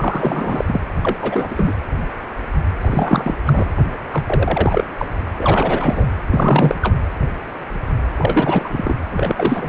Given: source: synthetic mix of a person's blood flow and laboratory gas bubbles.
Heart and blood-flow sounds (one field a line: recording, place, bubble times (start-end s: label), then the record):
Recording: Doppler ultrasound of blood flow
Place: precordium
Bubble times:
0.00-0.65 s: bubbles
0.67-0.80 s: bubbles
1.03-1.18 s: bubbles
1.22-1.55 s: bubbles
1.57-1.74 s: bubbles
2.81-3.34 s: bubbles
3.45-3.70 s: bubbles
4.13-4.24 s: bubbles
4.27-4.84 s: bubbles
4.99-5.06 s: bubbles
5.38-6.08 s: bubbles
6.31-6.75 s: bubbles
6.82-6.95 s: bubbles
8.17-8.70 s: bubbles
8.72-8.94 s: bubbles
9.11-9.69 s: bubbles
From the record:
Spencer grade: 3 (all of the cardiac periods contain showers or single bubble signals, but not dominating or overriding the cardiac motion signals)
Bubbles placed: anywhere in the cardiac cycle